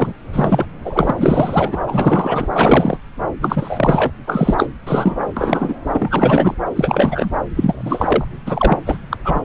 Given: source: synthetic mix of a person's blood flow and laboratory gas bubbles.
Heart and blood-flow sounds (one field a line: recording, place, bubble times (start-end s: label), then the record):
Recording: Doppler ultrasound of blood flow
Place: subclavian vein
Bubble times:
0.00-0.13 s: bubbles
0.33-0.66 s: bubbles
0.82-1.78 s: bubbles
1.87-2.47 s: bubbles
2.53-2.97 s: bubbles
3.40-4.10 s: bubbles
4.27-4.66 s: bubbles
4.87-5.25 s: bubbles
5.37-5.75 s: bubbles
5.92-6.54 s: bubbles
6.75-7.33 s: bubbles
7.54-8.25 s: bubbles
8.46-8.78 s: bubbles
8.86-8.98 s: bubbles
9.11-9.17 s: bubbles
9.25-9.44 s: bubbles
From the record:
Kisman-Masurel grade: 333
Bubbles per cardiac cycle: rolling drumbeat, 9 or more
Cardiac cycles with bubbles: 50 to 99%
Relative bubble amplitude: loud (0.450 to 0.775)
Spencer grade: 3 (all of the cardiac periods contain showers or single bubble signals, but not dominating or overriding the cardiac motion signals)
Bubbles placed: anywhere in the cardiac cycle